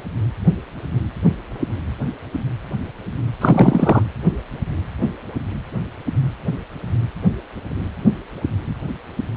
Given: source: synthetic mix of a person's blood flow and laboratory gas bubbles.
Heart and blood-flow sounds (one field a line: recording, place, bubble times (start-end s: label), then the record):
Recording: Doppler ultrasound of blood flow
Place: precordium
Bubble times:
3.41-4.03 s: bubbles
From the record:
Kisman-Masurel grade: 223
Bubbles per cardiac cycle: several, 3 to 8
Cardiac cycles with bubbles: 10 to 50%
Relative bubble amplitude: loud (0.450 to 0.775)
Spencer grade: 2 (many but less than half of the cardiac periods contain bubble signals, singularly or in groups)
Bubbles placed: anywhere in the cardiac cycle